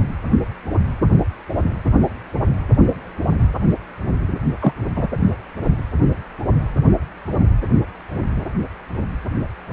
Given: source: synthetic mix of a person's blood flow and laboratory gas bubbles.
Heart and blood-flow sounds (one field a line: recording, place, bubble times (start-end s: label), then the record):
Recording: Doppler ultrasound of blood flow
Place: precordium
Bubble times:
4.61-4.72 s: bubbles
4.96-5.07 s: bubbles
From the record:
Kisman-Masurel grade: 113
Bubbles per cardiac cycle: 1 to 2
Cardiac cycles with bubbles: 1 to 10%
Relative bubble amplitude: loud (0.450 to 0.775)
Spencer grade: 1 (occasional bubble signal discernible with the cardiac motion signal, with majority of cardiac periods free of bubbles)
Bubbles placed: anywhere in the cardiac cycle